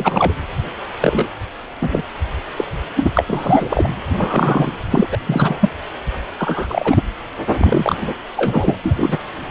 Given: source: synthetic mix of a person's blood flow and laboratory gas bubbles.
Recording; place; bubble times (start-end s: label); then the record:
Doppler ultrasound of blood flow; precordium
0.00-0.33 s: bubbles
1.01-1.29 s: bubbles
1.81-2.02 s: bubbles
2.56-2.65 s: bubbles
2.96-3.10 s: bubbles
3.14-3.24 s: bubbles
3.27-3.93 s: bubbles
4.18-4.71 s: bubbles
4.91-5.07 s: bubbles
5.12-5.18 s: bubbles
5.27-5.70 s: bubbles
6.38-7.02 s: bubbles
7.51-7.95 s: bubbles
8.02-8.14 s: bubbles
8.37-8.78 s: bubbles
8.83-9.19 s: bubbles
From the record:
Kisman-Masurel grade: 243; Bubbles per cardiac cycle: several, 3 to 8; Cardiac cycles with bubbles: 100%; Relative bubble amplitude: loud (0.450 to 0.775); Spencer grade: 3 (all of the cardiac periods contain showers or single bubble signals, but not dominating or overriding the cardiac motion signals); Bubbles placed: anywhere in the cardiac cycle